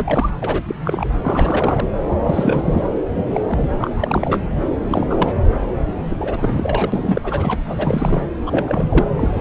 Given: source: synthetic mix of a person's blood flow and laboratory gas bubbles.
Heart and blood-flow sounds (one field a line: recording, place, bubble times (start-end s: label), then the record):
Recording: Doppler ultrasound of blood flow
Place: subclavian vein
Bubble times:
0.00-0.30 s: bubbles
0.42-0.63 s: bubbles
0.68-0.75 s: bubbles
0.85-1.09 s: bubbles
1.22-1.88 s: bubbles
2.17-2.87 s: bubbles
3.32-3.42 s: bubbles
3.48-3.69 s: bubbles
3.79-4.41 s: bubbles
4.88-5.07 s: bubbles
5.10-5.38 s: bubbles
5.67-5.74 s: bubbles
5.89-5.94 s: bubbles
6.10-7.59 s: bubbles
7.66-8.27 s: bubbles
8.46-9.05 s: bubbles
9.17-9.28 s: bubbles
9.33-9.41 s: bubbles
From the record:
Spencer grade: 3 (all of the cardiac periods contain showers or single bubble signals, but not dominating or overriding the cardiac motion signals)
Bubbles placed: anywhere in the cardiac cycle